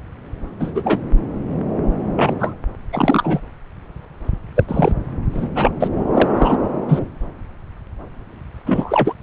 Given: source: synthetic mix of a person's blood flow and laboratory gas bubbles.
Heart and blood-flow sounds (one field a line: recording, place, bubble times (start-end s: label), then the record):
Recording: Doppler ultrasound of blood flow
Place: subclavian vein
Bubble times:
0.59-1.01 s: bubbles
2.17-2.33 s: bubbles
2.39-2.53 s: bubbles
2.92-3.40 s: bubbles
4.55-4.64 s: bubbles
4.68-4.93 s: bubbles
5.35-5.48 s: bubbles
5.54-5.72 s: bubbles
5.79-5.88 s: bubbles
6.14-6.29 s: bubbles
6.33-6.58 s: bubbles
6.88-7.00 s: bubbles
8.66-9.13 s: bubbles
From the record:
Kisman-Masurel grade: 233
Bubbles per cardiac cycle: several, 3 to 8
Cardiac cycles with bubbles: 50 to 99%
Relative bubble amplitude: loud (0.450 to 0.775)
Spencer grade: 3 (all of the cardiac periods contain showers or single bubble signals, but not dominating or overriding the cardiac motion signals)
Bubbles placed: anywhere in the cardiac cycle